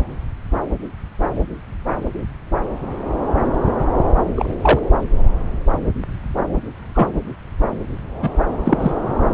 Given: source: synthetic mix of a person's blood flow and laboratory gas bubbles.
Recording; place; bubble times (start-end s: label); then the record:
Doppler ultrasound of blood flow; subclavian vein
4.35-4.54 s: bubbles
4.61-4.79 s: bubbles
6.95-7.08 s: bubbles
8.21-8.31 s: bubbles
8.65-8.96 s: bubbles
From the record:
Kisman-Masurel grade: 123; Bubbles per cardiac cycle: 1 to 2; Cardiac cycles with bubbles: 10 to 50%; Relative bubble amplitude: loud (0.450 to 0.775); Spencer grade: 2 (many but less than half of the cardiac periods contain bubble signals, singularly or in groups); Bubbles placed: anywhere in the cardiac cycle